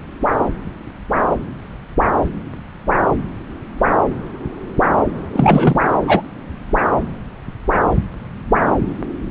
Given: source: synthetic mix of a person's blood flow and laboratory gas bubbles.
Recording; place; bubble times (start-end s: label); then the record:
Doppler ultrasound of blood flow; subclavian vein
5.33-5.80 s: bubbles
6.06-6.21 s: bubbles
From the record:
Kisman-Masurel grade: 213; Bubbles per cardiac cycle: several, 3 to 8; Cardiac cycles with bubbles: 1 to 10%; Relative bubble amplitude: loud (0.450 to 0.775); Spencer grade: 1 (occasional bubble signal discernible with the cardiac motion signal, with majority of cardiac periods free of bubbles); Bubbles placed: anywhere in the cardiac cycle